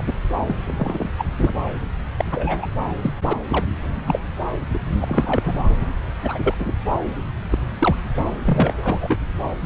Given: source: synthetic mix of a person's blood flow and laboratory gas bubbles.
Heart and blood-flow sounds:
Doppler ultrasound of blood flow; subclavian vein
0.00-0.13 s: bubbles
0.40-0.56 s: bubbles
0.66-1.09 s: bubbles
1.18-1.26 s: bubbles
1.39-1.53 s: bubbles
2.17-2.25 s: bubbles
2.31-2.67 s: bubbles
3.02-3.14 s: bubbles
3.25-3.33 s: bubbles
3.52-3.67 s: bubbles
4.05-4.20 s: bubbles
4.74-4.78 s: bubbles
5.01-5.69 s: bubbles
6.24-6.38 s: bubbles
6.42-6.54 s: bubbles
6.58-6.72 s: bubbles
7.51-7.58 s: bubbles
7.79-7.95 s: bubbles
8.44-9.17 s: bubbles
From the record:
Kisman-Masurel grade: 242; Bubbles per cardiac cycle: several, 3 to 8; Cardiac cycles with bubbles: 100%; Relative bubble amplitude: moderate (0.250 to 0.450); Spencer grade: 3 (all of the cardiac periods contain showers or single bubble signals, but not dominating or overriding the cardiac motion signals); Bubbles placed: anywhere in the cardiac cycle

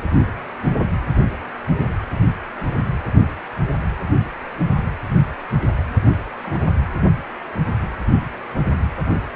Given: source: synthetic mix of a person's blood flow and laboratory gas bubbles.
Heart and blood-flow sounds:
Doppler ultrasound of blood flow; precordium
2.11-2.17 s: bubbles
6.43-6.64 s: bubbles
From the record:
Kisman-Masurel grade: 121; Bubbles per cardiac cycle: 1 to 2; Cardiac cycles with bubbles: 10 to 50%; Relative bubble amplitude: barely perceptible (0.100 to 0.250); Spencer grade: 2 (many but less than half of the cardiac periods contain bubble signals, singularly or in groups); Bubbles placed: anywhere in the cardiac cycle

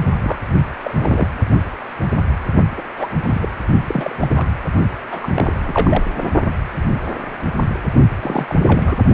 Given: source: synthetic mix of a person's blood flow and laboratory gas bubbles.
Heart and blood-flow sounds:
Doppler ultrasound of blood flow; precordium
0.21-0.39 s: bubbles
0.84-1.28 s: bubbles
2.77-2.83 s: bubbles
2.97-3.09 s: bubbles
3.22-3.49 s: bubbles
3.88-4.16 s: bubbles
4.20-4.47 s: bubbles
5.06-6.04 s: bubbles
6.18-6.29 s: bubbles
8.21-8.55 s: bubbles
8.67-8.97 s: bubbles
From the record:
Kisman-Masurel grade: 232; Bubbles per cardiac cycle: several, 3 to 8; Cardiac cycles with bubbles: 50 to 99%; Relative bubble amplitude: moderate (0.250 to 0.450); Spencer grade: 3 (all of the cardiac periods contain showers or single bubble signals, but not dominating or overriding the cardiac motion signals); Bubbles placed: only in the low amplitude regions of the cardiac cycle

